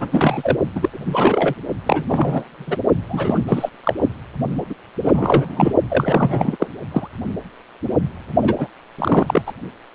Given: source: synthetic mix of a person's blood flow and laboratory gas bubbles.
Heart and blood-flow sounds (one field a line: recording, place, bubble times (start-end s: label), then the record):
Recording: Doppler ultrasound of blood flow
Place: precordium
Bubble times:
0.00-0.56 s: bubbles
0.75-0.90 s: bubbles
0.93-1.54 s: bubbles
1.85-2.77 s: bubbles
3.08-3.43 s: bubbles
3.48-3.69 s: bubbles
3.83-3.94 s: bubbles
4.02-4.09 s: bubbles
4.70-4.75 s: bubbles
5.02-5.73 s: bubbles
5.90-6.57 s: bubbles
6.60-6.69 s: bubbles
6.91-7.08 s: bubbles
8.42-8.55 s: bubbles
8.58-8.68 s: bubbles
8.99-9.42 s: bubbles
9.46-9.53 s: bubbles
From the record:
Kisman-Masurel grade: 333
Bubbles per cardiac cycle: rolling drumbeat, 9 or more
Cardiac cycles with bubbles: 50 to 99%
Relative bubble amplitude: loud (0.450 to 0.775)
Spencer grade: 3 (all of the cardiac periods contain showers or single bubble signals, but not dominating or overriding the cardiac motion signals)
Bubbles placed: only in the low amplitude regions of the cardiac cycle